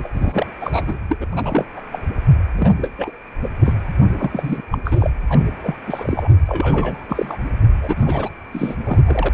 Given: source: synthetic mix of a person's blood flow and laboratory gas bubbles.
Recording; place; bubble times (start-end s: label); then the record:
Doppler ultrasound of blood flow; precordium
0.04-0.08 s: bubbles
0.14-0.47 s: bubbles
0.60-0.99 s: bubbles
1.08-1.17 s: bubbles
1.20-1.26 s: bubbles
1.32-1.65 s: bubbles
1.76-1.81 s: bubbles
1.91-1.99 s: bubbles
2.56-2.73 s: bubbles
2.77-2.89 s: bubbles
2.97-3.11 s: bubbles
3.42-3.49 s: bubbles
3.64-3.74 s: bubbles
4.19-4.61 s: bubbles
4.71-4.78 s: bubbles
4.84-5.11 s: bubbles
5.29-5.40 s: bubbles
5.63-5.74 s: bubbles
5.87-6.29 s: bubbles
6.47-7.05 s: bubbles
7.08-7.37 s: bubbles
7.82-8.29 s: bubbles
8.52-9.29 s: bubbles
From the record:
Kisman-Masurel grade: 342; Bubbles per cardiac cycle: rolling drumbeat, 9 or more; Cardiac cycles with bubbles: 100%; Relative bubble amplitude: moderate (0.250 to 0.450); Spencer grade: 3 (all of the cardiac periods contain showers or single bubble signals, but not dominating or overriding the cardiac motion signals); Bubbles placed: anywhere in the cardiac cycle